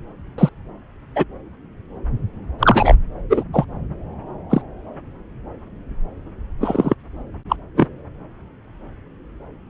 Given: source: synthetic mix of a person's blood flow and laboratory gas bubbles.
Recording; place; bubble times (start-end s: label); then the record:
Doppler ultrasound of blood flow; subclavian vein
0.38-0.49 s: bubbles
1.15-1.24 s: bubbles
2.59-2.95 s: bubbles
3.29-3.44 s: bubbles
3.53-3.65 s: bubbles
4.50-4.61 s: bubbles
6.60-6.95 s: bubbles
7.49-7.56 s: bubbles
7.76-7.87 s: bubbles
From the record:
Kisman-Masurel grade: 123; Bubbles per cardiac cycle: 1 to 2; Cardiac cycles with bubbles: 10 to 50%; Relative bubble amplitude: loud (0.450 to 0.775); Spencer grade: 2 (many but less than half of the cardiac periods contain bubble signals, singularly or in groups); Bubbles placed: anywhere in the cardiac cycle